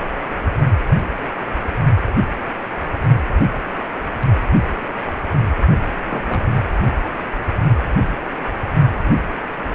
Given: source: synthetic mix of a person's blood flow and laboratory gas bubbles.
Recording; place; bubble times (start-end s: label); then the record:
Doppler ultrasound of blood flow; precordium
6.09-6.47 s: bubbles
From the record:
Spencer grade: 1 (occasional bubble signal discernible with the cardiac motion signal, with majority of cardiac periods free of bubbles); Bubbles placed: only in the low amplitude regions of the cardiac cycle